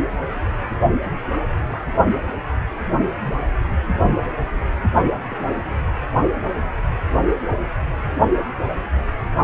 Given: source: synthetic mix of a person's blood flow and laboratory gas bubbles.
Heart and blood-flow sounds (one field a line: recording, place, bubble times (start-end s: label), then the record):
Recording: Doppler ultrasound of blood flow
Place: precordium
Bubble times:
1.66-1.85 s: bubbles
5.30-5.50 s: bubbles
From the record:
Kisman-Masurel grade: 121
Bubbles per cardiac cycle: 1 to 2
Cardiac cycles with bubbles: 10 to 50%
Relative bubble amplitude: barely perceptible (0.100 to 0.250)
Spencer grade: 2 (many but less than half of the cardiac periods contain bubble signals, singularly or in groups)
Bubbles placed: only in the low amplitude regions of the cardiac cycle